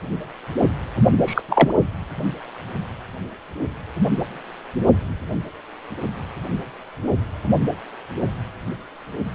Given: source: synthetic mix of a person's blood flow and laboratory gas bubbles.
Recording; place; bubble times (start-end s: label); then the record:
Doppler ultrasound of blood flow; precordium
1.26-1.41 s: bubbles
1.48-1.74 s: bubbles
From the record:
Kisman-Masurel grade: 113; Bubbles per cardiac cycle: 1 to 2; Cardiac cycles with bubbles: 1 to 10%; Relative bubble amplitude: loud (0.450 to 0.775); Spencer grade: 1 (occasional bubble signal discernible with the cardiac motion signal, with majority of cardiac periods free of bubbles); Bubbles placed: only in the low amplitude regions of the cardiac cycle